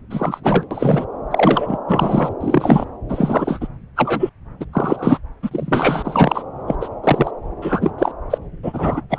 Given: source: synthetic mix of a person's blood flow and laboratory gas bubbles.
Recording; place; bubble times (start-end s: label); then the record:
Doppler ultrasound of blood flow; subclavian vein
0.10-0.40 s: bubbles
0.43-0.66 s: bubbles
0.70-1.05 s: bubbles
1.30-1.79 s: bubbles
1.87-2.33 s: bubbles
2.41-2.85 s: bubbles
3.08-3.68 s: bubbles
3.96-4.30 s: bubbles
4.60-4.65 s: bubbles
4.73-5.19 s: bubbles
5.42-6.43 s: bubbles
6.67-6.75 s: bubbles
6.80-6.88 s: bubbles
7.04-7.31 s: bubbles
7.62-7.92 s: bubbles
7.98-8.12 s: bubbles
8.30-8.38 s: bubbles
8.62-9.01 s: bubbles
9.10-9.19 s: bubbles
From the record:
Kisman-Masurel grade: 243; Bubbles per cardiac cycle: several, 3 to 8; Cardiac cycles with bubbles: 100%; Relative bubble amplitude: loud (0.450 to 0.775); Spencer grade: 3 (all of the cardiac periods contain showers or single bubble signals, but not dominating or overriding the cardiac motion signals); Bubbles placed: anywhere in the cardiac cycle